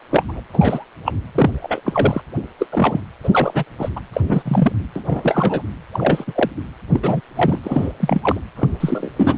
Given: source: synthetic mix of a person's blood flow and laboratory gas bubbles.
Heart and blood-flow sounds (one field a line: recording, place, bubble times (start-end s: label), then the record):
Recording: Doppler ultrasound of blood flow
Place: precordium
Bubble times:
0.11-0.23 s: bubbles
0.29-0.40 s: bubbles
0.53-0.85 s: bubbles
1.06-1.14 s: bubbles
1.34-1.51 s: bubbles
1.62-1.81 s: bubbles
1.85-2.21 s: bubbles
2.58-2.67 s: bubbles
2.72-3.00 s: bubbles
3.23-3.29 s: bubbles
3.32-3.64 s: bubbles
3.78-3.89 s: bubbles
3.96-4.00 s: bubbles
4.13-4.21 s: bubbles
4.28-4.42 s: bubbles
4.45-4.72 s: bubbles
4.95-5.02 s: bubbles
5.05-5.62 s: bubbles
5.91-6.24 s: bubbles
6.27-6.49 s: bubbles
6.93-7.00 s: bubbles
7.02-7.20 s: bubbles
7.35-7.59 s: bubbles
7.63-7.92 s: bubbles
7.99-8.39 s: bubbles
8.55-8.68 s: bubbles
8.79-9.09 s: bubbles
9.16-9.38 s: bubbles
From the record:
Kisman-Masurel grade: 242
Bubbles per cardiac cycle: several, 3 to 8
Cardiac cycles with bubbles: 100%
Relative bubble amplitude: moderate (0.250 to 0.450)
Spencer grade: 3 (all of the cardiac periods contain showers or single bubble signals, but not dominating or overriding the cardiac motion signals)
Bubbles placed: anywhere in the cardiac cycle